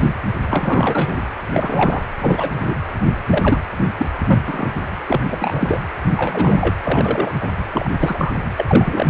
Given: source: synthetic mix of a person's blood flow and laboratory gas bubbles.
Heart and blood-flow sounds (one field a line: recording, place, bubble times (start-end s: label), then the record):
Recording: Doppler ultrasound of blood flow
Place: precordium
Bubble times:
0.00-0.12 s: bubbles
0.50-1.32 s: bubbles
1.53-2.04 s: bubbles
2.19-2.51 s: bubbles
2.56-2.75 s: bubbles
3.29-3.58 s: bubbles
3.97-4.06 s: bubbles
4.27-4.39 s: bubbles
4.46-4.75 s: bubbles
5.07-5.21 s: bubbles
5.30-5.79 s: bubbles
6.17-6.75 s: bubbles
6.83-7.33 s: bubbles
7.41-7.47 s: bubbles
7.72-7.89 s: bubbles
7.99-8.34 s: bubbles
8.56-9.06 s: bubbles
From the record:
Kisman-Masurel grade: 243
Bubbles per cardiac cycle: several, 3 to 8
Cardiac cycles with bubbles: 100%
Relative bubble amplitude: loud (0.450 to 0.775)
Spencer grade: 3 (all of the cardiac periods contain showers or single bubble signals, but not dominating or overriding the cardiac motion signals)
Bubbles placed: anywhere in the cardiac cycle